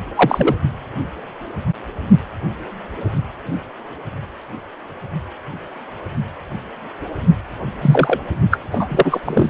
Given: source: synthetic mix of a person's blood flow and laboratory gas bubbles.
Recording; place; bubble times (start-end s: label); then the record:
Doppler ultrasound of blood flow; precordium
0.15-0.55 s: bubbles
7.81-8.20 s: bubbles
8.51-8.57 s: bubbles
8.72-9.21 s: bubbles
9.26-9.50 s: bubbles
From the record:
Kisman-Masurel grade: 223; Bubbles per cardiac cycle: several, 3 to 8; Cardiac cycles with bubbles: 10 to 50%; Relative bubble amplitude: loud (0.450 to 0.775); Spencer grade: 2 (many but less than half of the cardiac periods contain bubble signals, singularly or in groups); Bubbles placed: anywhere in the cardiac cycle